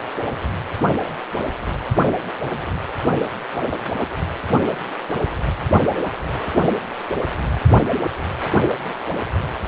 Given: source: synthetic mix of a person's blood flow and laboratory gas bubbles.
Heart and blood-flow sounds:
Doppler ultrasound of blood flow; precordium
no bubbles
From the record:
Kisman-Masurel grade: 000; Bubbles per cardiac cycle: 0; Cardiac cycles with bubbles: 0%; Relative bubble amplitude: no bubbles discernible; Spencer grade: 0 (complete lack of bubble signals)

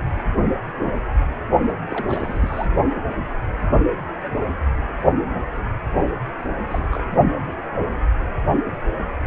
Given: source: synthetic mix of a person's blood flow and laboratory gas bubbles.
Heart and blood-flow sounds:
Doppler ultrasound of blood flow; precordium
1.59-1.73 s: bubbles
1.91-2.67 s: bubbles
6.67-6.87 s: bubbles
6.90-7.03 s: bubbles
From the record:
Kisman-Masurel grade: 221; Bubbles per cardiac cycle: several, 3 to 8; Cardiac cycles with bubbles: 10 to 50%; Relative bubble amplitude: barely perceptible (0.100 to 0.250); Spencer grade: 2 (many but less than half of the cardiac periods contain bubble signals, singularly or in groups); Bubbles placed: only in the low amplitude regions of the cardiac cycle

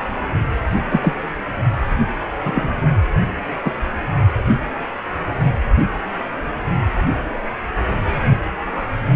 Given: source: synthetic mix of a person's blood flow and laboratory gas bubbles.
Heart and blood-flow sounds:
Doppler ultrasound of blood flow; precordium
0.90-1.14 s: bubbles
2.44-2.96 s: bubbles
3.65-3.72 s: bubbles
From the record:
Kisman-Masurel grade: 123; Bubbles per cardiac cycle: 1 to 2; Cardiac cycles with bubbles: 10 to 50%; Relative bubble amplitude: loud (0.450 to 0.775); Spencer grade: 2 (many but less than half of the cardiac periods contain bubble signals, singularly or in groups); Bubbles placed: only in the low amplitude regions of the cardiac cycle

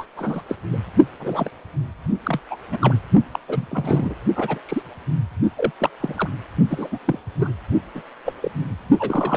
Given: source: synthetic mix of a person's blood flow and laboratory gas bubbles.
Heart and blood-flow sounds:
Doppler ultrasound of blood flow; precordium
0.00-0.05 s: bubbles
0.16-0.43 s: bubbles
0.48-0.56 s: bubbles
0.73-0.77 s: bubbles
1.19-1.51 s: bubbles
2.23-2.40 s: bubbles
2.50-2.57 s: bubbles
2.71-2.78 s: bubbles
2.81-2.94 s: bubbles
3.31-3.39 s: bubbles
3.48-3.68 s: bubbles
3.70-4.15 s: bubbles
4.36-4.59 s: bubbles
4.65-4.83 s: bubbles
5.57-5.71 s: bubbles
5.79-5.90 s: bubbles
6.00-6.15 s: bubbles
6.18-6.29 s: bubbles
6.69-6.88 s: bubbles
6.92-6.99 s: bubbles
7.05-7.19 s: bubbles
7.38-7.53 s: bubbles
7.95-8.03 s: bubbles
8.25-8.33 s: bubbles
8.43-8.50 s: bubbles
8.99-9.37 s: bubbles
From the record:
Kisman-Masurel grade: 242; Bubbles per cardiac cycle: several, 3 to 8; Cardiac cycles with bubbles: 100%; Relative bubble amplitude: moderate (0.250 to 0.450); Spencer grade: 3 (all of the cardiac periods contain showers or single bubble signals, but not dominating or overriding the cardiac motion signals); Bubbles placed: only in the low amplitude regions of the cardiac cycle

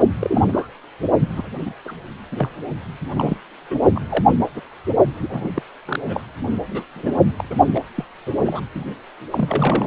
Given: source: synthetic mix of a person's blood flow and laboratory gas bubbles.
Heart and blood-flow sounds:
Doppler ultrasound of blood flow; precordium
0.21-0.44 s: bubbles
0.48-0.68 s: bubbles
1.21-1.28 s: bubbles
1.35-1.50 s: bubbles
1.65-1.72 s: bubbles
1.85-1.92 s: bubbles
2.31-2.50 s: bubbles
3.14-3.37 s: bubbles
3.70-3.76 s: bubbles
3.95-4.00 s: bubbles
4.09-4.25 s: bubbles
4.54-4.61 s: bubbles
5.21-5.50 s: bubbles
5.53-5.62 s: bubbles
5.85-6.22 s: bubbles
6.69-6.83 s: bubbles
6.96-7.21 s: bubbles
7.38-7.44 s: bubbles
7.50-7.55 s: bubbles
7.74-7.79 s: bubbles
7.95-8.04 s: bubbles
8.26-8.31 s: bubbles
8.38-8.61 s: bubbles
8.74-8.83 s: bubbles
9.30-9.87 s: bubbles
From the record:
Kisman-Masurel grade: 242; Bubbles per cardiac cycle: several, 3 to 8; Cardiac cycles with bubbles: 100%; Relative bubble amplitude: moderate (0.250 to 0.450); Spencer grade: 3 (all of the cardiac periods contain showers or single bubble signals, but not dominating or overriding the cardiac motion signals); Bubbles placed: only in the low amplitude regions of the cardiac cycle

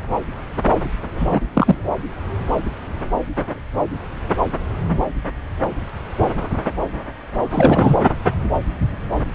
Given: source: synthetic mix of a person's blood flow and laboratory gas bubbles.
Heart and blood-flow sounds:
Doppler ultrasound of blood flow; subclavian vein
1.19-1.42 s: bubbles
1.54-1.76 s: bubbles
7.50-7.95 s: bubbles
From the record:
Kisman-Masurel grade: 223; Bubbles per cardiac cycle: several, 3 to 8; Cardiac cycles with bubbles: 10 to 50%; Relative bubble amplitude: loud (0.450 to 0.775); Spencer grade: 2 (many but less than half of the cardiac periods contain bubble signals, singularly or in groups); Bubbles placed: anywhere in the cardiac cycle

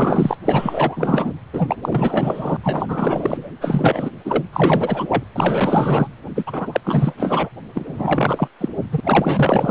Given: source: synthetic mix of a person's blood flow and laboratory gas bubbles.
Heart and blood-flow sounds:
Doppler ultrasound of blood flow; precordium
0.00-0.37 s: bubbles
0.45-1.33 s: bubbles
1.52-1.76 s: bubbles
1.82-2.57 s: bubbles
2.63-3.48 s: bubbles
3.61-4.10 s: bubbles
4.25-4.44 s: bubbles
4.53-5.24 s: bubbles
5.34-6.08 s: bubbles
6.35-6.81 s: bubbles
6.84-7.14 s: bubbles
7.17-7.49 s: bubbles
7.74-8.47 s: bubbles
8.60-8.68 s: bubbles
8.91-9.00 s: bubbles
9.04-9.71 s: bubbles
From the record:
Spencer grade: 4 (maximum detectable bubble signal sounding continuously throughout systole and diastole of every cardiac period, and overriding the amplitude of the normal cardiac signals); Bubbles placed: anywhere in the cardiac cycle

